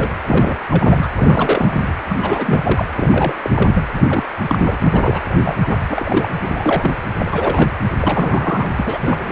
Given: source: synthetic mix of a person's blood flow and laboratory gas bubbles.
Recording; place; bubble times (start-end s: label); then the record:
Doppler ultrasound of blood flow; precordium
0.00-0.15 s: bubbles
0.26-0.56 s: bubbles
0.70-1.08 s: bubbles
1.15-1.93 s: bubbles
2.08-2.17 s: bubbles
2.22-2.84 s: bubbles
2.96-3.50 s: bubbles
3.56-3.83 s: bubbles
3.95-4.05 s: bubbles
4.08-4.24 s: bubbles
4.47-4.77 s: bubbles
4.83-5.55 s: bubbles
5.61-5.65 s: bubbles
5.69-5.79 s: bubbles
5.89-6.29 s: bubbles
6.33-6.92 s: bubbles
7.19-7.73 s: bubbles
8.02-8.70 s: bubbles
8.77-9.32 s: bubbles
From the record:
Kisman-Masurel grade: 342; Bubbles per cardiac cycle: rolling drumbeat, 9 or more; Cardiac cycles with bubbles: 100%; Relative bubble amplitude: moderate (0.250 to 0.450); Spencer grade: 3 (all of the cardiac periods contain showers or single bubble signals, but not dominating or overriding the cardiac motion signals); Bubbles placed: anywhere in the cardiac cycle